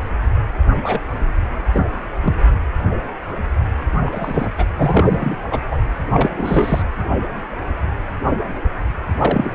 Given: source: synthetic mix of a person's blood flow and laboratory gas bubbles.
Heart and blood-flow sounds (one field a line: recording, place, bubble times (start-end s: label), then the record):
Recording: Doppler ultrasound of blood flow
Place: precordium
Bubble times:
0.83-1.00 s: bubbles
1.73-1.88 s: bubbles
2.23-2.34 s: bubbles
4.06-4.50 s: bubbles
4.58-4.65 s: bubbles
4.77-5.35 s: bubbles
5.51-5.60 s: bubbles
5.71-5.77 s: bubbles
6.14-6.30 s: bubbles
6.37-6.83 s: bubbles
9.18-9.51 s: bubbles
From the record:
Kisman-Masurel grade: 232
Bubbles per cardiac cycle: several, 3 to 8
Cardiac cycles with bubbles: 50 to 99%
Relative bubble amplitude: moderate (0.250 to 0.450)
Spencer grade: 3 (all of the cardiac periods contain showers or single bubble signals, but not dominating or overriding the cardiac motion signals)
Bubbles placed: anywhere in the cardiac cycle